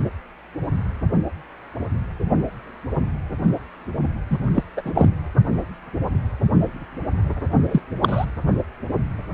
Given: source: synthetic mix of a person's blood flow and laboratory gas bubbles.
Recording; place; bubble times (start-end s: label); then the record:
Doppler ultrasound of blood flow; precordium
4.29-4.39 s: bubbles
4.54-4.62 s: bubbles
4.77-4.82 s: bubbles
4.85-5.10 s: bubbles
7.71-7.82 s: bubbles
8.01-8.25 s: bubbles
From the record:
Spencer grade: 2 (many but less than half of the cardiac periods contain bubble signals, singularly or in groups); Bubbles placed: anywhere in the cardiac cycle